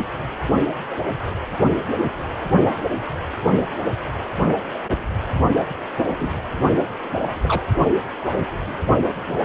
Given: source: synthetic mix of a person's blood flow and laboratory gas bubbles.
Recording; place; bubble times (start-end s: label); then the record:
Doppler ultrasound of blood flow; precordium
5.54-5.63 s: bubbles
5.97-6.43 s: bubbles
7.28-7.33 s: bubbles
7.41-7.63 s: bubbles
8.30-8.46 s: bubbles
From the record:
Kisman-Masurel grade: 123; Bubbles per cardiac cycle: 1 to 2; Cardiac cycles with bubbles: 10 to 50%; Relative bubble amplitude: loud (0.450 to 0.775); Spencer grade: 2 (many but less than half of the cardiac periods contain bubble signals, singularly or in groups); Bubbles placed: only in the low amplitude regions of the cardiac cycle